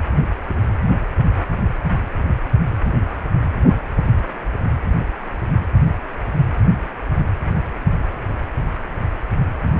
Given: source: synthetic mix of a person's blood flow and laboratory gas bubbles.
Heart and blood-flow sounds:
Doppler ultrasound of blood flow; precordium
no bubbles
From the record:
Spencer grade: 0 (complete lack of bubble signals)

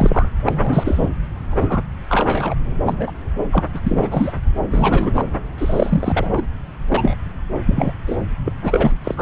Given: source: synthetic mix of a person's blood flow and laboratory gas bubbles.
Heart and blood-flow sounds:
Doppler ultrasound of blood flow; subclavian vein
0.00-0.29 s: bubbles
0.46-1.09 s: bubbles
1.50-1.83 s: bubbles
2.09-2.55 s: bubbles
2.83-3.12 s: bubbles
3.51-3.63 s: bubbles
3.74-3.81 s: bubbles
3.83-4.33 s: bubbles
4.71-5.25 s: bubbles
5.58-6.42 s: bubbles
6.90-7.15 s: bubbles
7.66-7.92 s: bubbles
8.06-8.16 s: bubbles
8.44-8.52 s: bubbles
8.61-8.92 s: bubbles
9.04-9.22 s: bubbles
From the record:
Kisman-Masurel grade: 243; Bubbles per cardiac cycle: several, 3 to 8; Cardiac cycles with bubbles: 100%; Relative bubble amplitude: loud (0.450 to 0.775); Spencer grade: 3 (all of the cardiac periods contain showers or single bubble signals, but not dominating or overriding the cardiac motion signals); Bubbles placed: anywhere in the cardiac cycle

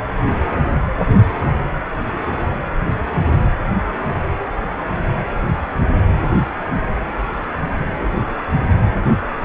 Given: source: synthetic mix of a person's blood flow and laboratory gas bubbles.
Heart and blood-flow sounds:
Doppler ultrasound of blood flow; precordium
no bubbles
From the record:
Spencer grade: 0 (complete lack of bubble signals)

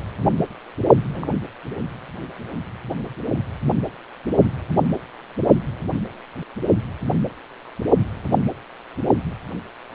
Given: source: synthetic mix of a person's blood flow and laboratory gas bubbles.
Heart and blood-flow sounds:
Doppler ultrasound of blood flow; precordium
1.14-1.29 s: bubbles
From the record:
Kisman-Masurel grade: 111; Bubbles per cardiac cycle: 1 to 2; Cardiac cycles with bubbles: 1 to 10%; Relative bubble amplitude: barely perceptible (0.100 to 0.250); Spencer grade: 1 (occasional bubble signal discernible with the cardiac motion signal, with majority of cardiac periods free of bubbles); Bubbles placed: only in the low amplitude regions of the cardiac cycle

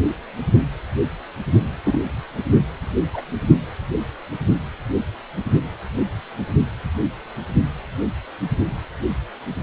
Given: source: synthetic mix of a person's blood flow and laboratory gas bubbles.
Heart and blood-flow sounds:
Doppler ultrasound of blood flow; precordium
1.85-2.00 s: bubbles
3.12-3.22 s: bubbles
From the record:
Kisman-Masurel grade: 112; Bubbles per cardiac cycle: 1 to 2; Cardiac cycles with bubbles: 1 to 10%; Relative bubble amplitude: moderate (0.250 to 0.450); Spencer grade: 1 (occasional bubble signal discernible with the cardiac motion signal, with majority of cardiac periods free of bubbles); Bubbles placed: only in the low amplitude regions of the cardiac cycle

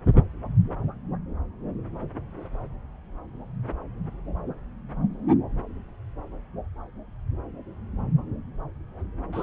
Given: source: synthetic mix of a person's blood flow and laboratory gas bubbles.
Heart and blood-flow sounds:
Doppler ultrasound of blood flow; subclavian vein
9.32-9.43 s: bubbles
From the record:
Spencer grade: 1 (occasional bubble signal discernible with the cardiac motion signal, with majority of cardiac periods free of bubbles); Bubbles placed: anywhere in the cardiac cycle

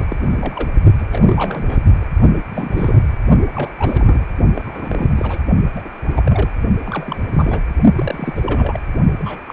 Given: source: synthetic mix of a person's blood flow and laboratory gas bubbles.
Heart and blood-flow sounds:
Doppler ultrasound of blood flow; precordium
0.00-0.05 s: bubbles
0.10-0.17 s: bubbles
0.22-0.68 s: bubbles
0.99-1.05 s: bubbles
1.11-1.82 s: bubbles
2.01-2.06 s: bubbles
2.53-3.02 s: bubbles
3.55-3.72 s: bubbles
3.79-4.25 s: bubbles
4.54-5.13 s: bubbles
5.16-5.42 s: bubbles
5.75-5.89 s: bubbles
6.06-6.22 s: bubbles
6.25-6.52 s: bubbles
6.85-7.28 s: bubbles
7.32-7.60 s: bubbles
7.95-8.81 s: bubbles
9.19-9.41 s: bubbles
9.47-9.53 s: bubbles
From the record:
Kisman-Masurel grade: 342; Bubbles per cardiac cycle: rolling drumbeat, 9 or more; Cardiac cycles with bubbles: 100%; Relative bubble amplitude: moderate (0.250 to 0.450); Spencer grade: 3 (all of the cardiac periods contain showers or single bubble signals, but not dominating or overriding the cardiac motion signals); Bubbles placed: only in the low amplitude regions of the cardiac cycle

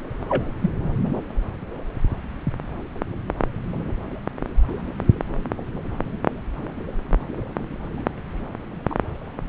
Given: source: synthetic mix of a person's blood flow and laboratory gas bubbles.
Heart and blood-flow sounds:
Doppler ultrasound of blood flow; subclavian vein
0.28-0.50 s: bubbles
0.62-0.70 s: bubbles
8.90-8.95 s: bubbles
From the record:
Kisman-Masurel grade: 122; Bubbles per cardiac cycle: 1 to 2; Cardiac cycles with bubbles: 10 to 50%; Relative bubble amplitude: moderate (0.250 to 0.450); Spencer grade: 2 (many but less than half of the cardiac periods contain bubble signals, singularly or in groups); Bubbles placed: anywhere in the cardiac cycle

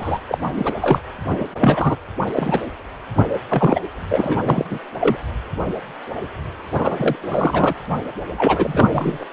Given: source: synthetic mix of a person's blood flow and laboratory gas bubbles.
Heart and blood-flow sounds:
Doppler ultrasound of blood flow; precordium
0.00-0.19 s: bubbles
0.28-0.38 s: bubbles
0.55-0.74 s: bubbles
0.81-1.00 s: bubbles
1.30-1.45 s: bubbles
1.60-1.96 s: bubbles
2.33-2.60 s: bubbles
3.16-3.25 s: bubbles
3.48-3.80 s: bubbles
4.10-4.64 s: bubbles
4.70-4.79 s: bubbles
5.00-5.17 s: bubbles
6.73-7.16 s: bubbles
7.22-7.73 s: bubbles
8.38-9.25 s: bubbles
From the record:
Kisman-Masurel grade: 333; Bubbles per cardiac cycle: rolling drumbeat, 9 or more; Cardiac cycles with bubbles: 50 to 99%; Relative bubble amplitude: loud (0.450 to 0.775); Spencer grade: 3 (all of the cardiac periods contain showers or single bubble signals, but not dominating or overriding the cardiac motion signals); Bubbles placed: anywhere in the cardiac cycle

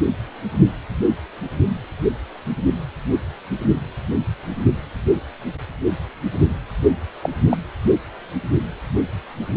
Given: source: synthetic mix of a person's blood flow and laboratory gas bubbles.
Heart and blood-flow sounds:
Doppler ultrasound of blood flow; precordium
7.21-7.29 s: bubbles
7.50-7.57 s: bubbles
From the record:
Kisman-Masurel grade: 113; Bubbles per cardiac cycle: 1 to 2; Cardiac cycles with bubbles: 1 to 10%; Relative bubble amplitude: loud (0.450 to 0.775); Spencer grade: 1 (occasional bubble signal discernible with the cardiac motion signal, with majority of cardiac periods free of bubbles); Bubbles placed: anywhere in the cardiac cycle

